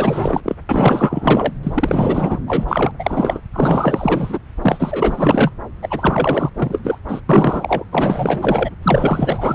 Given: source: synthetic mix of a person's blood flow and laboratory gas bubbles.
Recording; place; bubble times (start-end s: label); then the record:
Doppler ultrasound of blood flow; subclavian vein
0.00-0.55 s: bubbles
0.69-1.53 s: bubbles
1.63-2.39 s: bubbles
2.47-2.92 s: bubbles
2.99-3.41 s: bubbles
3.53-4.38 s: bubbles
4.61-5.51 s: bubbles
5.81-6.50 s: bubbles
6.54-6.98 s: bubbles
7.08-7.21 s: bubbles
7.29-7.84 s: bubbles
7.92-8.70 s: bubbles
8.83-9.55 s: bubbles
From the record:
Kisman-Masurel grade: 444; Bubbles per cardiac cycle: continuous sound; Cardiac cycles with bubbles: 100%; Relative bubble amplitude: maximal (0.775 to 0.999); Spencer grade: 4 (maximum detectable bubble signal sounding continuously throughout systole and diastole of every cardiac period, and overriding the amplitude of the normal cardiac signals); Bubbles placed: anywhere in the cardiac cycle